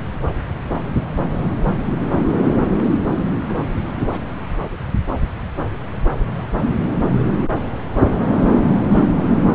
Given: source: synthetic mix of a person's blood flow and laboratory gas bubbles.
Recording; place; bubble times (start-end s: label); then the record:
Doppler ultrasound of blood flow; subclavian vein
2.77-2.99 s: bubbles
3.42-3.54 s: bubbles
3.73-3.79 s: bubbles
3.98-4.06 s: bubbles
4.11-4.21 s: bubbles
From the record:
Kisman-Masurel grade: 211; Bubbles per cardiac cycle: several, 3 to 8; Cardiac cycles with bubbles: 1 to 10%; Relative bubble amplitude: barely perceptible (0.100 to 0.250); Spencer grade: 1 (occasional bubble signal discernible with the cardiac motion signal, with majority of cardiac periods free of bubbles); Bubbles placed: anywhere in the cardiac cycle